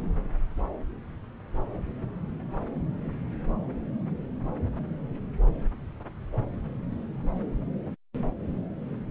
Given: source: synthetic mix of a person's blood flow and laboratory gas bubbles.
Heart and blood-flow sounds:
Doppler ultrasound of blood flow; subclavian vein
no bubbles
From the record:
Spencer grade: 0 (complete lack of bubble signals)

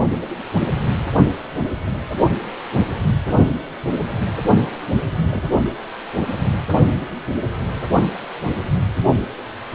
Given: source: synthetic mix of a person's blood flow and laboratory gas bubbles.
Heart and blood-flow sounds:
Doppler ultrasound of blood flow; precordium
5.15-5.41 s: bubbles
From the record:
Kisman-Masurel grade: 111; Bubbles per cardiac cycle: 1 to 2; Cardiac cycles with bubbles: 1 to 10%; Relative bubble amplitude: barely perceptible (0.100 to 0.250); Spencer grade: 1 (occasional bubble signal discernible with the cardiac motion signal, with majority of cardiac periods free of bubbles); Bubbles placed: only in the low amplitude regions of the cardiac cycle

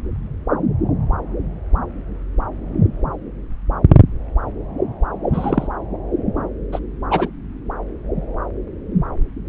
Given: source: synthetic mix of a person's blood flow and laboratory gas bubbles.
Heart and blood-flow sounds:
Doppler ultrasound of blood flow; subclavian vein
5.33-5.67 s: bubbles
6.71-6.79 s: bubbles
7.10-7.28 s: bubbles
From the record:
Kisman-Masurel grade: 123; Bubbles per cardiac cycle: 1 to 2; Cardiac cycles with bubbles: 10 to 50%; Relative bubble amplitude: loud (0.450 to 0.775); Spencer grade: 2 (many but less than half of the cardiac periods contain bubble signals, singularly or in groups); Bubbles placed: anywhere in the cardiac cycle

